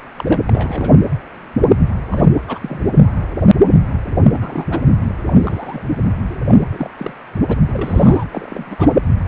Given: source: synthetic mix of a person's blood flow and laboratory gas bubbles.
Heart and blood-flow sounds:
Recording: Doppler ultrasound of blood flow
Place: precordium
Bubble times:
0.16-0.42 s: bubbles
0.45-0.92 s: bubbles
2.09-2.27 s: bubbles
2.47-2.81 s: bubbles
4.33-4.65 s: bubbles
4.70-4.79 s: bubbles
5.25-5.83 s: bubbles
6.30-6.36 s: bubbles
6.47-6.55 s: bubbles
6.71-6.89 s: bubbles
6.98-7.13 s: bubbles
7.48-7.57 s: bubbles
7.67-8.24 s: bubbles
8.31-8.76 s: bubbles
8.79-8.90 s: bubbles
From the record:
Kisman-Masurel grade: 232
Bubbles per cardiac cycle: several, 3 to 8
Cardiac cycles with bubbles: 50 to 99%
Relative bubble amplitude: moderate (0.250 to 0.450)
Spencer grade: 3 (all of the cardiac periods contain showers or single bubble signals, but not dominating or overriding the cardiac motion signals)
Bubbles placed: anywhere in the cardiac cycle

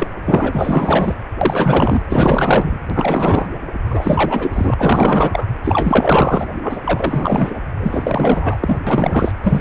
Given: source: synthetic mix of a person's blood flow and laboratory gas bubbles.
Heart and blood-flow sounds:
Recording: Doppler ultrasound of blood flow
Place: precordium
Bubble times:
0.00-0.07 s: bubbles
0.26-1.15 s: bubbles
1.41-2.02 s: bubbles
2.09-2.79 s: bubbles
2.90-3.47 s: bubbles
3.90-4.74 s: bubbles
4.78-5.46 s: bubbles
5.64-6.49 s: bubbles
6.62-6.81 s: bubbles
6.84-7.60 s: bubbles
7.80-8.78 s: bubbles
8.87-9.32 s: bubbles
9.43-9.61 s: bubbles
From the record:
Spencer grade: 4 (maximum detectable bubble signal sounding continuously throughout systole and diastole of every cardiac period, and overriding the amplitude of the normal cardiac signals)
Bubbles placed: anywhere in the cardiac cycle

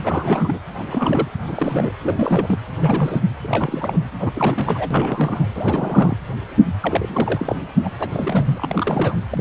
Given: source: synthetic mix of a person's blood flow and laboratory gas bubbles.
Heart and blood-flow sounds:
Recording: Doppler ultrasound of blood flow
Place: precordium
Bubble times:
0.03-0.59 s: bubbles
0.79-0.83 s: bubbles
0.87-1.28 s: bubbles
1.47-1.91 s: bubbles
2.03-2.58 s: bubbles
2.79-3.22 s: bubbles
3.41-3.98 s: bubbles
4.20-4.88 s: bubbles
4.91-5.48 s: bubbles
5.54-6.17 s: bubbles
6.67-6.72 s: bubbles
6.80-7.56 s: bubbles
7.84-7.90 s: bubbles
7.99-8.09 s: bubbles
8.12-9.15 s: bubbles
9.30-9.41 s: bubbles
From the record:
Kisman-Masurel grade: 342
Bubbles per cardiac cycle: rolling drumbeat, 9 or more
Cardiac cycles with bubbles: 100%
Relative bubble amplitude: moderate (0.250 to 0.450)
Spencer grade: 3 (all of the cardiac periods contain showers or single bubble signals, but not dominating or overriding the cardiac motion signals)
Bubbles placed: anywhere in the cardiac cycle

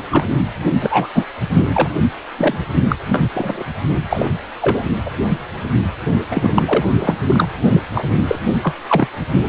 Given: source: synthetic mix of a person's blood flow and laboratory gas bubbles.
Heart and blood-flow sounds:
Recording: Doppler ultrasound of blood flow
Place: precordium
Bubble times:
0.11-0.25 s: bubbles
0.80-1.08 s: bubbles
1.14-1.25 s: bubbles
1.73-1.89 s: bubbles
2.38-2.66 s: bubbles
2.88-2.96 s: bubbles
3.08-3.23 s: bubbles
3.33-3.63 s: bubbles
4.10-4.30 s: bubbles
4.61-4.83 s: bubbles
5.05-5.10 s: bubbles
6.31-6.86 s: bubbles
6.99-7.16 s: bubbles
7.23-7.49 s: bubbles
7.70-7.81 s: bubbles
7.94-8.05 s: bubbles
8.27-8.39 s: bubbles
8.62-8.74 s: bubbles
8.88-9.08 s: bubbles
From the record:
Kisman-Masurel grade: 233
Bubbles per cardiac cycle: several, 3 to 8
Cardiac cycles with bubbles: 50 to 99%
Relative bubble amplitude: loud (0.450 to 0.775)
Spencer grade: 3 (all of the cardiac periods contain showers or single bubble signals, but not dominating or overriding the cardiac motion signals)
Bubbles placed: only in the low amplitude regions of the cardiac cycle

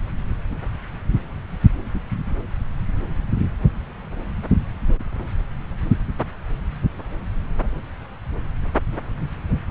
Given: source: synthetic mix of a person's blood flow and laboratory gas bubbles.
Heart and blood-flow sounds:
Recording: Doppler ultrasound of blood flow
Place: subclavian vein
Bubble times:
no bubbles
From the record:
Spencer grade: 0 (complete lack of bubble signals)

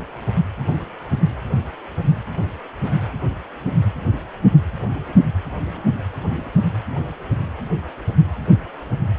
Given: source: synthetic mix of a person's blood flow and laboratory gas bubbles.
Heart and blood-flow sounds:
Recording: Doppler ultrasound of blood flow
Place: precordium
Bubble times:
no bubbles
From the record:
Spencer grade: 0 (complete lack of bubble signals)

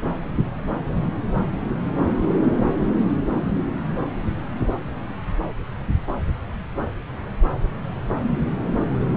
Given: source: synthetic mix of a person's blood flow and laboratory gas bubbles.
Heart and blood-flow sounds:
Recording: Doppler ultrasound of blood flow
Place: subclavian vein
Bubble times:
no bubbles
From the record:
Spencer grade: 0 (complete lack of bubble signals)

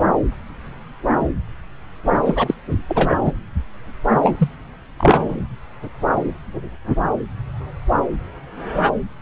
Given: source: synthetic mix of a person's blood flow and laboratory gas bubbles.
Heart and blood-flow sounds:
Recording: Doppler ultrasound of blood flow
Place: subclavian vein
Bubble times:
2.25-2.54 s: bubbles
2.88-3.17 s: bubbles
3.25-3.32 s: bubbles
4.22-4.49 s: bubbles
4.98-5.43 s: bubbles
From the record:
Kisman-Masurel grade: 223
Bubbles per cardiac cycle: several, 3 to 8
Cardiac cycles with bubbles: 10 to 50%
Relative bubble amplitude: loud (0.450 to 0.775)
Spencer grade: 2 (many but less than half of the cardiac periods contain bubble signals, singularly or in groups)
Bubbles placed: anywhere in the cardiac cycle

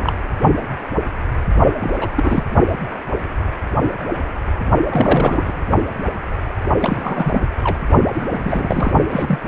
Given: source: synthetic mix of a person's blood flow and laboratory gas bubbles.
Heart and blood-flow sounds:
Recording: Doppler ultrasound of blood flow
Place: precordium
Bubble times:
0.00-0.13 s: bubbles
1.80-2.08 s: bubbles
2.15-2.44 s: bubbles
4.89-5.60 s: bubbles
6.79-7.42 s: bubbles
7.63-7.81 s: bubbles
8.13-8.27 s: bubbles
8.32-8.92 s: bubbles
9.10-9.38 s: bubbles
From the record:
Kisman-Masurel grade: 332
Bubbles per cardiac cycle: rolling drumbeat, 9 or more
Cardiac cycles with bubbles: 50 to 99%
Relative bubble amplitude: moderate (0.250 to 0.450)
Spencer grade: 3 (all of the cardiac periods contain showers or single bubble signals, but not dominating or overriding the cardiac motion signals)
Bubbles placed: only in the low amplitude regions of the cardiac cycle

